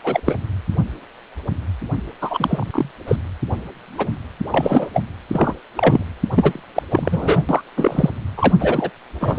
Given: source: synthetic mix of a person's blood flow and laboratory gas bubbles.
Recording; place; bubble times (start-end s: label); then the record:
Doppler ultrasound of blood flow; precordium
0.03-0.21 s: bubbles
0.26-0.35 s: bubbles
2.21-2.91 s: bubbles
3.08-3.16 s: bubbles
3.98-4.08 s: bubbles
4.52-4.87 s: bubbles
4.93-5.04 s: bubbles
5.33-5.54 s: bubbles
5.77-6.04 s: bubbles
6.34-6.62 s: bubbles
6.75-6.83 s: bubbles
6.90-7.42 s: bubbles
7.49-7.61 s: bubbles
7.77-8.10 s: bubbles
8.37-8.53 s: bubbles
8.59-8.90 s: bubbles
9.10-9.38 s: bubbles
From the record:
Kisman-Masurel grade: 333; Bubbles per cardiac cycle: rolling drumbeat, 9 or more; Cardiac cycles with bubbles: 50 to 99%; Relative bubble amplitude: loud (0.450 to 0.775); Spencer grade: 3 (all of the cardiac periods contain showers or single bubble signals, but not dominating or overriding the cardiac motion signals); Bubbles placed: anywhere in the cardiac cycle